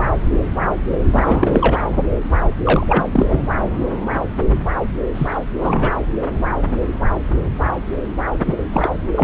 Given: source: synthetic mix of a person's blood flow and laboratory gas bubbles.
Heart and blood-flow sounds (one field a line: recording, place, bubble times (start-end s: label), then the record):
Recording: Doppler ultrasound of blood flow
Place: subclavian vein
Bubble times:
1.12-1.81 s: bubbles
2.64-3.04 s: bubbles
3.12-3.26 s: bubbles
3.29-3.46 s: bubbles
5.14-5.38 s: bubbles
5.54-5.97 s: bubbles
8.45-8.54 s: bubbles
8.72-8.89 s: bubbles
9.16-9.24 s: bubbles
From the record:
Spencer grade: 2 (many but less than half of the cardiac periods contain bubble signals, singularly or in groups)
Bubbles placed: anywhere in the cardiac cycle